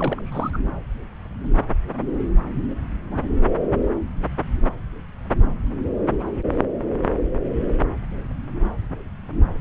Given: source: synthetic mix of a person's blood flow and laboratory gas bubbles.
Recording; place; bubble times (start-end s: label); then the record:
Doppler ultrasound of blood flow; subclavian vein
0.00-0.22 s: bubbles
0.26-0.58 s: bubbles
From the record:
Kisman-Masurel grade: 211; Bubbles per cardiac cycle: several, 3 to 8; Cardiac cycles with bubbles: 1 to 10%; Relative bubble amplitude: barely perceptible (0.100 to 0.250); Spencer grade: 1 (occasional bubble signal discernible with the cardiac motion signal, with majority of cardiac periods free of bubbles); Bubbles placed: anywhere in the cardiac cycle